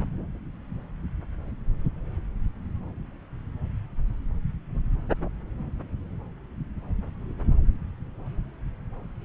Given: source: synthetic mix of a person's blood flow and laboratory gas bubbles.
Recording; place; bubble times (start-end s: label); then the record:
Doppler ultrasound of blood flow; subclavian vein
no bubbles
From the record:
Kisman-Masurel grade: 000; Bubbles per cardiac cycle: 0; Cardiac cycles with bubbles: 0%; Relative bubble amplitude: no bubbles discernible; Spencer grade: 0 (complete lack of bubble signals)